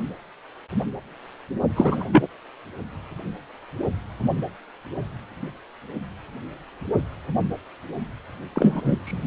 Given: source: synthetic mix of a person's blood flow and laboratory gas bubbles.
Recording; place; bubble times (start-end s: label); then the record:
Doppler ultrasound of blood flow; precordium
1.75-2.04 s: bubbles
2.12-2.27 s: bubbles
8.54-9.00 s: bubbles
9.03-9.27 s: bubbles
From the record:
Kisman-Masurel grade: 223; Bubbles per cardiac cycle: several, 3 to 8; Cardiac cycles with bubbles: 10 to 50%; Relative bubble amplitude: loud (0.450 to 0.775); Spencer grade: 2 (many but less than half of the cardiac periods contain bubble signals, singularly or in groups); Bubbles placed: only in the low amplitude regions of the cardiac cycle